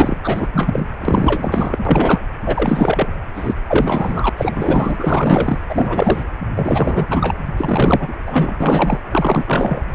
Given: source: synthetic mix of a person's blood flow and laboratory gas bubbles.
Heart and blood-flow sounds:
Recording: Doppler ultrasound of blood flow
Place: precordium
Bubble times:
0.00-0.17 s: bubbles
0.24-0.48 s: bubbles
0.53-0.86 s: bubbles
1.00-1.78 s: bubbles
1.85-2.21 s: bubbles
2.46-3.08 s: bubbles
3.35-3.54 s: bubbles
3.68-4.30 s: bubbles
4.37-5.58 s: bubbles
5.69-6.25 s: bubbles
6.56-7.07 s: bubbles
7.10-7.37 s: bubbles
7.57-8.13 s: bubbles
8.25-8.99 s: bubbles
9.12-9.44 s: bubbles
9.47-9.82 s: bubbles
From the record:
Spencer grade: 4 (maximum detectable bubble signal sounding continuously throughout systole and diastole of every cardiac period, and overriding the amplitude of the normal cardiac signals)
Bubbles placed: anywhere in the cardiac cycle

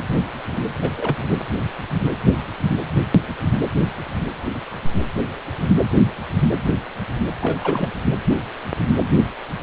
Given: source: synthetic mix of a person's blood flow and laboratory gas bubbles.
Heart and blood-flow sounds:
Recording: Doppler ultrasound of blood flow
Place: precordium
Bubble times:
0.81-0.89 s: bubbles
0.97-1.16 s: bubbles
1.22-1.40 s: bubbles
7.41-7.89 s: bubbles
From the record:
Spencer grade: 2 (many but less than half of the cardiac periods contain bubble signals, singularly or in groups)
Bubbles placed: anywhere in the cardiac cycle

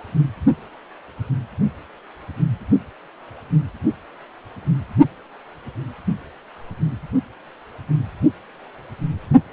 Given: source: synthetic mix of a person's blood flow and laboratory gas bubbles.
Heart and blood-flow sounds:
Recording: Doppler ultrasound of blood flow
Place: precordium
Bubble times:
no bubbles
From the record:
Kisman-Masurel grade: 000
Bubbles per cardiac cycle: 0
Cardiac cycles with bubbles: 0%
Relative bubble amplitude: no bubbles discernible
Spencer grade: 0 (complete lack of bubble signals)

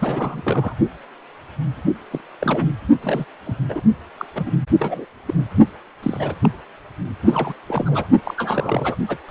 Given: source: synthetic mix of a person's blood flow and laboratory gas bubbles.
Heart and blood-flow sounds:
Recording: Doppler ultrasound of blood flow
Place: precordium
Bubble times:
0.00-0.74 s: bubbles
2.10-2.21 s: bubbles
2.41-2.69 s: bubbles
3.02-3.25 s: bubbles
3.46-3.53 s: bubbles
3.69-3.81 s: bubbles
4.17-4.25 s: bubbles
4.34-4.51 s: bubbles
4.79-5.05 s: bubbles
5.27-5.33 s: bubbles
5.38-5.45 s: bubbles
6.02-6.35 s: bubbles
6.43-6.49 s: bubbles
7.22-7.54 s: bubbles
7.67-8.11 s: bubbles
8.23-8.34 s: bubbles
8.37-8.96 s: bubbles
9.08-9.17 s: bubbles
9.29-9.31 s: bubbles
From the record:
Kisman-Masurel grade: 232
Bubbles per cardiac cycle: several, 3 to 8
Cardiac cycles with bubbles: 50 to 99%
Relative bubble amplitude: moderate (0.250 to 0.450)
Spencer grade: 3 (all of the cardiac periods contain showers or single bubble signals, but not dominating or overriding the cardiac motion signals)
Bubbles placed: only in the low amplitude regions of the cardiac cycle

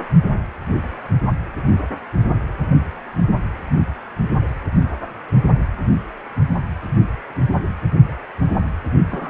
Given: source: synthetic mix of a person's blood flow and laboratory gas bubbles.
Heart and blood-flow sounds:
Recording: Doppler ultrasound of blood flow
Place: precordium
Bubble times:
9.10-9.30 s: bubbles
From the record:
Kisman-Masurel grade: 211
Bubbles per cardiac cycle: several, 3 to 8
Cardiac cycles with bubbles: 1 to 10%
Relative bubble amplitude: barely perceptible (0.100 to 0.250)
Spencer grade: 1 (occasional bubble signal discernible with the cardiac motion signal, with majority of cardiac periods free of bubbles)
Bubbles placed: anywhere in the cardiac cycle

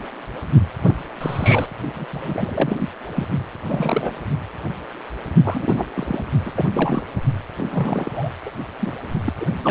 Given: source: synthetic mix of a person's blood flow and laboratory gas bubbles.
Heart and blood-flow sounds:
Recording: Doppler ultrasound of blood flow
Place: precordium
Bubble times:
0.83-0.94 s: bubbles
1.21-1.71 s: bubbles
1.95-2.06 s: bubbles
2.12-2.89 s: bubbles
3.15-3.28 s: bubbles
3.67-4.17 s: bubbles
5.43-5.88 s: bubbles
5.94-6.23 s: bubbles
6.45-7.02 s: bubbles
7.56-8.29 s: bubbles
8.45-8.50 s: bubbles
8.79-8.92 s: bubbles
9.25-9.33 s: bubbles
9.40-9.46 s: bubbles
9.63-9.71 s: bubbles
From the record:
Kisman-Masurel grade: 332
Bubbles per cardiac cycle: rolling drumbeat, 9 or more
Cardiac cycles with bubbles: 50 to 99%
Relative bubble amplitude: moderate (0.250 to 0.450)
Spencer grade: 3 (all of the cardiac periods contain showers or single bubble signals, but not dominating or overriding the cardiac motion signals)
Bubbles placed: only in the low amplitude regions of the cardiac cycle

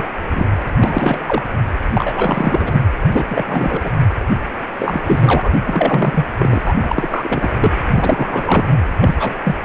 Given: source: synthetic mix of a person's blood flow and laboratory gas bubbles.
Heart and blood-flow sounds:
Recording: Doppler ultrasound of blood flow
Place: precordium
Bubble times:
0.00-0.09 s: bubbles
0.31-0.46 s: bubbles
0.80-1.20 s: bubbles
1.27-1.42 s: bubbles
1.93-2.80 s: bubbles
3.04-3.90 s: bubbles
4.79-5.51 s: bubbles
5.66-6.25 s: bubbles
6.38-6.62 s: bubbles
6.65-6.74 s: bubbles
6.78-7.48 s: bubbles
7.60-7.71 s: bubbles
7.93-8.78 s: bubbles
9.01-9.32 s: bubbles
9.43-9.55 s: bubbles
9.62-9.65 s: bubbles
From the record:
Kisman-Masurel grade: 342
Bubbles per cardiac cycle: rolling drumbeat, 9 or more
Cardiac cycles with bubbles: 100%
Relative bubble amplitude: moderate (0.250 to 0.450)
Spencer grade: 3 (all of the cardiac periods contain showers or single bubble signals, but not dominating or overriding the cardiac motion signals)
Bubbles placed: anywhere in the cardiac cycle

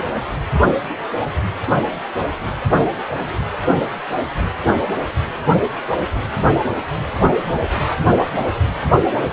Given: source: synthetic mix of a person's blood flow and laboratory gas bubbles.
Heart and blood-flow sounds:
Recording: Doppler ultrasound of blood flow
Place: precordium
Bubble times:
no bubbles
From the record:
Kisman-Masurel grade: 000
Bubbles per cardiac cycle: 0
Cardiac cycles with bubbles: 0%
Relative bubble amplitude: no bubbles discernible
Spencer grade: 0 (complete lack of bubble signals)

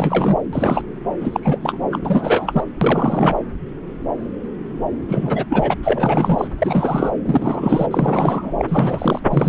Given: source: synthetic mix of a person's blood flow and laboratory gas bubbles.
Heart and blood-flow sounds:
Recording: Doppler ultrasound of blood flow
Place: subclavian vein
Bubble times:
0.00-0.36 s: bubbles
0.52-0.81 s: bubbles
1.20-1.59 s: bubbles
1.62-1.77 s: bubbles
1.91-1.99 s: bubbles
2.05-2.66 s: bubbles
2.81-3.37 s: bubbles
5.08-5.46 s: bubbles
5.49-5.75 s: bubbles
5.83-6.47 s: bubbles
6.58-7.17 s: bubbles
7.25-7.87 s: bubbles
7.90-8.52 s: bubbles
8.58-8.65 s: bubbles
8.68-9.21 s: bubbles
9.30-9.48 s: bubbles
From the record:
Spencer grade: 3 (all of the cardiac periods contain showers or single bubble signals, but not dominating or overriding the cardiac motion signals)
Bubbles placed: anywhere in the cardiac cycle

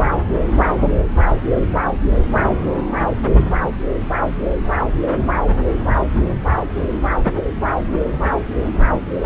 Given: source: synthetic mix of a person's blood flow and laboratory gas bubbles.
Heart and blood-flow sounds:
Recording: Doppler ultrasound of blood flow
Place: subclavian vein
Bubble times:
0.06-0.10 s: bubbles
0.69-0.74 s: bubbles
From the record:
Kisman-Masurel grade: 121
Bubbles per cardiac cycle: 1 to 2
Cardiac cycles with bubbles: 10 to 50%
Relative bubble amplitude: barely perceptible (0.100 to 0.250)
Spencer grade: 2 (many but less than half of the cardiac periods contain bubble signals, singularly or in groups)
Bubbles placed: anywhere in the cardiac cycle

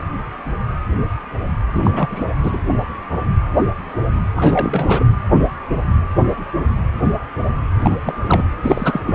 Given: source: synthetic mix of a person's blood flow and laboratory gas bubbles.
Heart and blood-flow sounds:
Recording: Doppler ultrasound of blood flow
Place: precordium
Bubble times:
1.75-2.25 s: bubbles
2.43-2.61 s: bubbles
4.36-5.04 s: bubbles
7.82-7.97 s: bubbles
8.05-8.14 s: bubbles
8.27-8.44 s: bubbles
8.62-9.01 s: bubbles
9.05-9.15 s: bubbles
From the record:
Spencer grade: 3 (all of the cardiac periods contain showers or single bubble signals, but not dominating or overriding the cardiac motion signals)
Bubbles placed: anywhere in the cardiac cycle

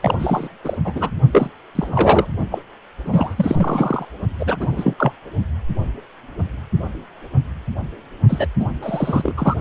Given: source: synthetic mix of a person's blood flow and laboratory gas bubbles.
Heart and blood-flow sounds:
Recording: Doppler ultrasound of blood flow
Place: precordium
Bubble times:
0.02-0.49 s: bubbles
0.64-0.77 s: bubbles
0.84-1.10 s: bubbles
1.31-1.49 s: bubbles
1.75-2.27 s: bubbles
2.50-2.62 s: bubbles
3.05-4.05 s: bubbles
4.39-4.57 s: bubbles
4.59-4.93 s: bubbles
4.98-5.12 s: bubbles
8.29-8.47 s: bubbles
8.59-8.66 s: bubbles
8.82-9.32 s: bubbles
9.37-9.54 s: bubbles
From the record:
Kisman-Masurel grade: 332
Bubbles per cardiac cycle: rolling drumbeat, 9 or more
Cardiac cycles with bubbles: 50 to 99%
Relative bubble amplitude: moderate (0.250 to 0.450)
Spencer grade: 3 (all of the cardiac periods contain showers or single bubble signals, but not dominating or overriding the cardiac motion signals)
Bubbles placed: only in the low amplitude regions of the cardiac cycle

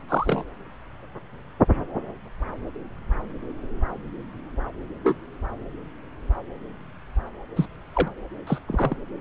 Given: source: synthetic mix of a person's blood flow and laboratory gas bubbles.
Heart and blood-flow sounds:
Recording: Doppler ultrasound of blood flow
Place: subclavian vein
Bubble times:
0.08-0.43 s: bubbles
5.04-5.17 s: bubbles
7.56-7.66 s: bubbles
7.93-8.08 s: bubbles
8.46-8.58 s: bubbles
8.66-8.96 s: bubbles
From the record:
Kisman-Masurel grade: 122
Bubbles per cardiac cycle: 1 to 2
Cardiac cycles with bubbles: 10 to 50%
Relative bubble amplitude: moderate (0.250 to 0.450)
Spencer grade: 2 (many but less than half of the cardiac periods contain bubble signals, singularly or in groups)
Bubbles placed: anywhere in the cardiac cycle

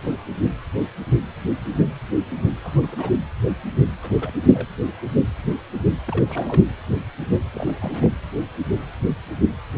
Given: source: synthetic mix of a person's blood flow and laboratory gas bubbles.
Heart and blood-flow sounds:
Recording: Doppler ultrasound of blood flow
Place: precordium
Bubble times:
2.63-3.11 s: bubbles
4.03-4.17 s: bubbles
4.21-4.32 s: bubbles
4.34-4.39 s: bubbles
4.54-4.68 s: bubbles
6.08-6.65 s: bubbles
7.53-7.75 s: bubbles
7.81-8.09 s: bubbles
From the record:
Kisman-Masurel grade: 221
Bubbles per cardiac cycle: several, 3 to 8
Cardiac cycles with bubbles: 10 to 50%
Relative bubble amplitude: barely perceptible (0.100 to 0.250)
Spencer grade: 2 (many but less than half of the cardiac periods contain bubble signals, singularly or in groups)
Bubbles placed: anywhere in the cardiac cycle

